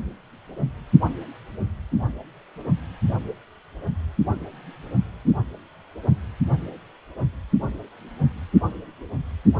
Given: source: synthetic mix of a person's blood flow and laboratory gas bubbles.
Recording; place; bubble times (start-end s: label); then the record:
Doppler ultrasound of blood flow; precordium
no bubbles
From the record:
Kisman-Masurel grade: 000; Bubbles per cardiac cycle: 0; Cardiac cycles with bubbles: 0%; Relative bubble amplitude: no bubbles discernible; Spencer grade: 0 (complete lack of bubble signals)